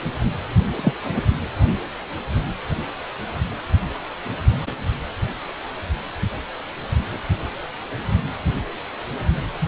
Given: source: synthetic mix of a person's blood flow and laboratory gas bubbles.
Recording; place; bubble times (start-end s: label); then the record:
Doppler ultrasound of blood flow; precordium
0.75-0.93 s: bubbles
1.16-1.21 s: bubbles
From the record:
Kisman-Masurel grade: 112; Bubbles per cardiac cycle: 1 to 2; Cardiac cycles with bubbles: 1 to 10%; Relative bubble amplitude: moderate (0.250 to 0.450); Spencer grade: 1 (occasional bubble signal discernible with the cardiac motion signal, with majority of cardiac periods free of bubbles); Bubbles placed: anywhere in the cardiac cycle